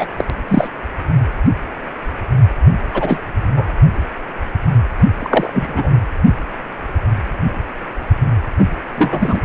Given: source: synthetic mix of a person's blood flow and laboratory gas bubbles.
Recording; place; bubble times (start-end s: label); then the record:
Doppler ultrasound of blood flow; precordium
0.00-0.07 s: bubbles
0.17-0.24 s: bubbles
0.48-0.68 s: bubbles
2.94-3.19 s: bubbles
3.42-3.70 s: bubbles
5.18-5.97 s: bubbles
8.58-8.67 s: bubbles
8.96-9.41 s: bubbles
From the record:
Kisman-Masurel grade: 233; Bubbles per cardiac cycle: several, 3 to 8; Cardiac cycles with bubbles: 50 to 99%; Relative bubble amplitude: loud (0.450 to 0.775); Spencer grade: 3 (all of the cardiac periods contain showers or single bubble signals, but not dominating or overriding the cardiac motion signals); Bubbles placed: only in the low amplitude regions of the cardiac cycle